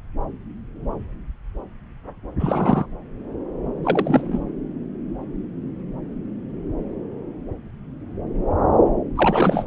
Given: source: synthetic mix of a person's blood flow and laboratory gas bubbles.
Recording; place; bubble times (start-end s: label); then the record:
Doppler ultrasound of blood flow; subclavian vein
2.40-2.87 s: bubbles
3.83-4.44 s: bubbles
9.15-9.65 s: bubbles
From the record:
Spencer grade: 2 (many but less than half of the cardiac periods contain bubble signals, singularly or in groups); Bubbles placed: anywhere in the cardiac cycle